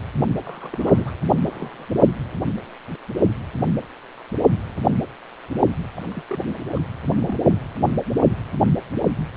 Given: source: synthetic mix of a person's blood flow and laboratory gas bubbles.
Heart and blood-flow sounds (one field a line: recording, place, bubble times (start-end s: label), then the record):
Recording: Doppler ultrasound of blood flow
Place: precordium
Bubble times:
0.43-1.11 s: bubbles
1.43-1.86 s: bubbles
5.95-6.03 s: bubbles
6.10-6.23 s: bubbles
6.29-6.38 s: bubbles
6.72-6.79 s: bubbles
7.07-7.38 s: bubbles
From the record:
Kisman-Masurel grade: 221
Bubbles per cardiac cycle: several, 3 to 8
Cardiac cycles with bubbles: 10 to 50%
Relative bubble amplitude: barely perceptible (0.100 to 0.250)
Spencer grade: 2 (many but less than half of the cardiac periods contain bubble signals, singularly or in groups)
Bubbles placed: only in the low amplitude regions of the cardiac cycle